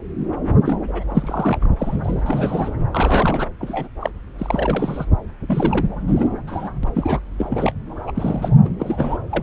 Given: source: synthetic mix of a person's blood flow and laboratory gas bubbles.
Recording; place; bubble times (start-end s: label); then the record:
Doppler ultrasound of blood flow; subclavian vein
0.52-0.79 s: bubbles
0.89-1.03 s: bubbles
1.09-1.68 s: bubbles
1.78-2.71 s: bubbles
2.92-3.47 s: bubbles
3.60-3.88 s: bubbles
4.00-4.10 s: bubbles
4.38-5.05 s: bubbles
5.47-5.87 s: bubbles
6.08-6.28 s: bubbles
6.47-6.70 s: bubbles
6.83-6.91 s: bubbles
6.95-7.20 s: bubbles
7.38-7.72 s: bubbles
8.06-8.12 s: bubbles
8.14-8.57 s: bubbles
8.64-8.69 s: bubbles
8.79-9.17 s: bubbles
9.29-9.43 s: bubbles
From the record:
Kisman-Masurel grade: 242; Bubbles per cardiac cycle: several, 3 to 8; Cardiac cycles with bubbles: 100%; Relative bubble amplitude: moderate (0.250 to 0.450); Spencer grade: 3 (all of the cardiac periods contain showers or single bubble signals, but not dominating or overriding the cardiac motion signals); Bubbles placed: anywhere in the cardiac cycle